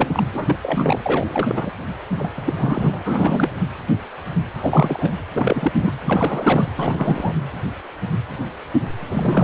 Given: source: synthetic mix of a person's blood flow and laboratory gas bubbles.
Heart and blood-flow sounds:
Doppler ultrasound of blood flow; precordium
0.00-0.24 s: bubbles
0.33-0.56 s: bubbles
0.62-1.01 s: bubbles
1.04-1.71 s: bubbles
2.18-2.32 s: bubbles
2.36-2.53 s: bubbles
2.57-3.02 s: bubbles
3.04-3.62 s: bubbles
4.61-5.14 s: bubbles
5.33-5.72 s: bubbles
5.77-5.92 s: bubbles
6.06-6.69 s: bubbles
6.77-7.33 s: bubbles
9.05-9.44 s: bubbles
From the record:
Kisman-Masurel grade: 332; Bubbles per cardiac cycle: rolling drumbeat, 9 or more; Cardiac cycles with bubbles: 50 to 99%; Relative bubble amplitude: moderate (0.250 to 0.450); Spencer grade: 3 (all of the cardiac periods contain showers or single bubble signals, but not dominating or overriding the cardiac motion signals); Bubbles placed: anywhere in the cardiac cycle

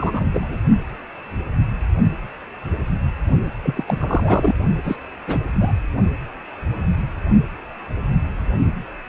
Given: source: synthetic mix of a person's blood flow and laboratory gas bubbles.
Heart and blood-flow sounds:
Doppler ultrasound of blood flow; precordium
0.00-0.24 s: bubbles
0.33-0.57 s: bubbles
3.64-3.85 s: bubbles
3.88-4.53 s: bubbles
4.84-4.96 s: bubbles
5.27-5.38 s: bubbles
5.60-5.71 s: bubbles
From the record:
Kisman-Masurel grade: 222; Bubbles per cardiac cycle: several, 3 to 8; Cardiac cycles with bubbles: 10 to 50%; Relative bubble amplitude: moderate (0.250 to 0.450); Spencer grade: 2 (many but less than half of the cardiac periods contain bubble signals, singularly or in groups); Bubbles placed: only in the low amplitude regions of the cardiac cycle

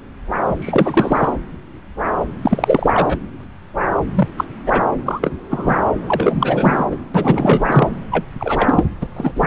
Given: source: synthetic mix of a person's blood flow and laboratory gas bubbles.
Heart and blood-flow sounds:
Doppler ultrasound of blood flow; subclavian vein
0.58-1.31 s: bubbles
2.42-3.18 s: bubbles
4.14-4.29 s: bubbles
4.37-4.44 s: bubbles
4.66-4.81 s: bubbles
5.05-5.36 s: bubbles
5.50-5.79 s: bubbles
6.08-6.85 s: bubbles
6.91-6.96 s: bubbles
7.14-7.88 s: bubbles
8.12-8.25 s: bubbles
8.40-8.85 s: bubbles
9.02-9.08 s: bubbles
9.16-9.32 s: bubbles
9.36-9.47 s: bubbles
From the record:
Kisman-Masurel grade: 233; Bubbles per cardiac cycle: several, 3 to 8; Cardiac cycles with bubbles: 50 to 99%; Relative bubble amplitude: loud (0.450 to 0.775); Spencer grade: 3 (all of the cardiac periods contain showers or single bubble signals, but not dominating or overriding the cardiac motion signals); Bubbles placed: anywhere in the cardiac cycle

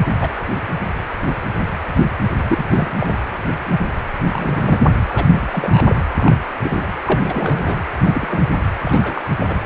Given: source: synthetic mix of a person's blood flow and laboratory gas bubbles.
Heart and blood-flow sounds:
Doppler ultrasound of blood flow; precordium
0.21-0.30 s: bubbles
2.48-2.65 s: bubbles
2.69-3.38 s: bubbles
3.71-3.78 s: bubbles
4.31-4.80 s: bubbles
5.09-6.01 s: bubbles
6.18-6.35 s: bubbles
6.62-6.86 s: bubbles
7.07-7.79 s: bubbles
8.05-8.45 s: bubbles
8.84-9.27 s: bubbles
9.39-9.58 s: bubbles
From the record:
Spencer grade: 3 (all of the cardiac periods contain showers or single bubble signals, but not dominating or overriding the cardiac motion signals); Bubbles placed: anywhere in the cardiac cycle

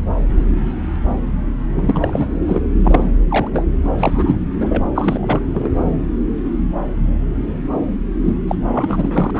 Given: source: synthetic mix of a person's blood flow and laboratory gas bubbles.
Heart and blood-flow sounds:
Doppler ultrasound of blood flow; subclavian vein
1.75-2.28 s: bubbles
2.47-2.62 s: bubbles
2.83-3.10 s: bubbles
3.29-3.49 s: bubbles
3.52-3.66 s: bubbles
3.98-4.38 s: bubbles
4.59-4.83 s: bubbles
4.95-5.42 s: bubbles
5.54-5.71 s: bubbles
8.25-8.33 s: bubbles
8.47-8.55 s: bubbles
8.72-9.31 s: bubbles
9.33-9.40 s: bubbles
From the record:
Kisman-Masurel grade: 332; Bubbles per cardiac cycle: rolling drumbeat, 9 or more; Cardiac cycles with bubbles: 50 to 99%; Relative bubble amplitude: moderate (0.250 to 0.450); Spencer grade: 3 (all of the cardiac periods contain showers or single bubble signals, but not dominating or overriding the cardiac motion signals); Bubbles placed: anywhere in the cardiac cycle

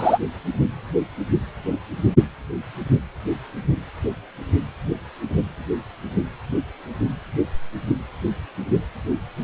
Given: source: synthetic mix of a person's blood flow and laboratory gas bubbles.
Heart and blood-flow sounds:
Doppler ultrasound of blood flow; precordium
0.00-0.18 s: bubbles
From the record:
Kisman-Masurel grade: 213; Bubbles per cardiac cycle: several, 3 to 8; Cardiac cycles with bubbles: 1 to 10%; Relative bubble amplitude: loud (0.450 to 0.775); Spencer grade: 1 (occasional bubble signal discernible with the cardiac motion signal, with majority of cardiac periods free of bubbles); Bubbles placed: anywhere in the cardiac cycle

